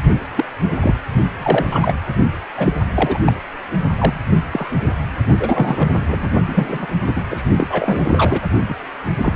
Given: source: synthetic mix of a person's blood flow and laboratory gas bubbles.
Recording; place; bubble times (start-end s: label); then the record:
Doppler ultrasound of blood flow; precordium
0.35-0.45 s: bubbles
0.81-1.00 s: bubbles
1.36-1.66 s: bubbles
1.71-1.93 s: bubbles
2.57-2.73 s: bubbles
2.95-3.19 s: bubbles
3.26-3.33 s: bubbles
3.98-4.19 s: bubbles
4.52-4.71 s: bubbles
4.87-4.93 s: bubbles
5.39-6.04 s: bubbles
6.08-6.28 s: bubbles
6.46-6.87 s: bubbles
7.07-7.21 s: bubbles
7.30-7.42 s: bubbles
7.58-8.42 s: bubbles
8.68-8.75 s: bubbles
9.18-9.34 s: bubbles
From the record:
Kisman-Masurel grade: 243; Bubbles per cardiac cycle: several, 3 to 8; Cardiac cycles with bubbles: 100%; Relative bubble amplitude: loud (0.450 to 0.775); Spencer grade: 3 (all of the cardiac periods contain showers or single bubble signals, but not dominating or overriding the cardiac motion signals); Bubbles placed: only in the low amplitude regions of the cardiac cycle